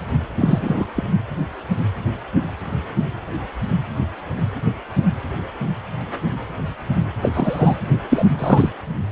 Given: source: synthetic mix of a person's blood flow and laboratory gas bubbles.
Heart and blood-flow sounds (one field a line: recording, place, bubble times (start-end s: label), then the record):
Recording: Doppler ultrasound of blood flow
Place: precordium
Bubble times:
0.37-0.85 s: bubbles
0.95-1.03 s: bubbles
7.22-7.29 s: bubbles
7.33-7.76 s: bubbles
8.09-8.25 s: bubbles
8.38-8.71 s: bubbles
From the record:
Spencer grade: 2 (many but less than half of the cardiac periods contain bubble signals, singularly or in groups)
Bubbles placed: only in the low amplitude regions of the cardiac cycle